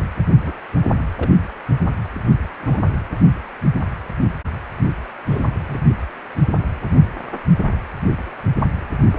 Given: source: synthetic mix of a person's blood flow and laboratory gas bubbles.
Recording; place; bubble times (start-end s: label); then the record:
Doppler ultrasound of blood flow; precordium
0.45-0.54 s: bubbles
1.17-1.31 s: bubbles
2.59-2.80 s: bubbles
3.10-3.17 s: bubbles
5.29-5.44 s: bubbles
5.67-5.81 s: bubbles
From the record:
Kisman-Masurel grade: 121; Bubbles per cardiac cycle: 1 to 2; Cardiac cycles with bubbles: 10 to 50%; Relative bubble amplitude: barely perceptible (0.100 to 0.250); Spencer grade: 2 (many but less than half of the cardiac periods contain bubble signals, singularly or in groups); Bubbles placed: only in the low amplitude regions of the cardiac cycle